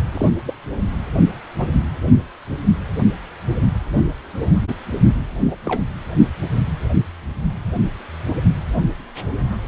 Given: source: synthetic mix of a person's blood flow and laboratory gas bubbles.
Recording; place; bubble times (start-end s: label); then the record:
Doppler ultrasound of blood flow; precordium
0.12-0.29 s: bubbles
0.46-0.53 s: bubbles
1.58-1.68 s: bubbles
5.47-5.55 s: bubbles
5.65-5.80 s: bubbles
From the record:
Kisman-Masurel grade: 122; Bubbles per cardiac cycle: 1 to 2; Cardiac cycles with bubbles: 10 to 50%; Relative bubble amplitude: moderate (0.250 to 0.450); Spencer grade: 2 (many but less than half of the cardiac periods contain bubble signals, singularly or in groups); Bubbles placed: only in the low amplitude regions of the cardiac cycle